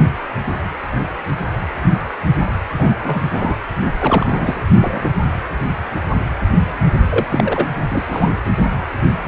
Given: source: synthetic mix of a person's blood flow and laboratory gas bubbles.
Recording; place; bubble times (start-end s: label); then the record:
Doppler ultrasound of blood flow; precordium
2.79-2.90 s: bubbles
3.02-3.21 s: bubbles
3.31-3.57 s: bubbles
4.01-4.68 s: bubbles
4.80-5.11 s: bubbles
7.09-7.27 s: bubbles
7.30-7.69 s: bubbles
7.89-8.38 s: bubbles
From the record:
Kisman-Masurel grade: 223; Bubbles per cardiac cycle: several, 3 to 8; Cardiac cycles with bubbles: 10 to 50%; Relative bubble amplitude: loud (0.450 to 0.775); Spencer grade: 2 (many but less than half of the cardiac periods contain bubble signals, singularly or in groups); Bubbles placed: anywhere in the cardiac cycle